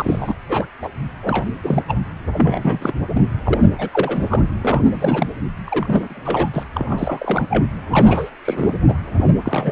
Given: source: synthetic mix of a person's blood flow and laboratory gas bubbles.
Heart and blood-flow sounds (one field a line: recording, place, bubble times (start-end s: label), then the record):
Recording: Doppler ultrasound of blood flow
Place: precordium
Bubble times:
0.00-0.34 s: bubbles
0.49-0.67 s: bubbles
0.80-0.89 s: bubbles
1.22-1.46 s: bubbles
1.64-1.82 s: bubbles
1.88-1.98 s: bubbles
2.38-2.93 s: bubbles
3.14-3.22 s: bubbles
3.45-3.89 s: bubbles
3.91-4.27 s: bubbles
4.29-4.44 s: bubbles
4.61-5.33 s: bubbles
5.67-6.50 s: bubbles
6.53-6.64 s: bubbles
6.73-7.45 s: bubbles
7.50-7.65 s: bubbles
7.89-8.30 s: bubbles
8.45-8.74 s: bubbles
8.88-8.94 s: bubbles
9.17-9.25 s: bubbles
9.44-9.72 s: bubbles
From the record:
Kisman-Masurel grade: 342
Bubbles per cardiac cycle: rolling drumbeat, 9 or more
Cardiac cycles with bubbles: 100%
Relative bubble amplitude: moderate (0.250 to 0.450)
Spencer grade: 3 (all of the cardiac periods contain showers or single bubble signals, but not dominating or overriding the cardiac motion signals)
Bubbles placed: anywhere in the cardiac cycle